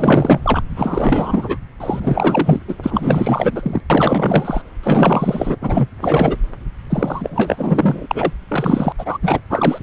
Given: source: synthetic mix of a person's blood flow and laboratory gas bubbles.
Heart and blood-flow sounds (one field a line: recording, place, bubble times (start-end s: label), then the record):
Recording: Doppler ultrasound of blood flow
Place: subclavian vein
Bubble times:
0.00-0.62 s: bubbles
0.76-1.59 s: bubbles
1.80-2.60 s: bubbles
2.67-2.74 s: bubbles
2.82-3.80 s: bubbles
3.90-4.62 s: bubbles
4.83-5.56 s: bubbles
5.61-5.89 s: bubbles
6.01-6.38 s: bubbles
6.90-8.06 s: bubbles
8.11-8.32 s: bubbles
8.48-8.93 s: bubbles
8.98-9.18 s: bubbles
9.22-9.40 s: bubbles
9.49-9.79 s: bubbles
From the record:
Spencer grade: 4 (maximum detectable bubble signal sounding continuously throughout systole and diastole of every cardiac period, and overriding the amplitude of the normal cardiac signals)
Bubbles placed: anywhere in the cardiac cycle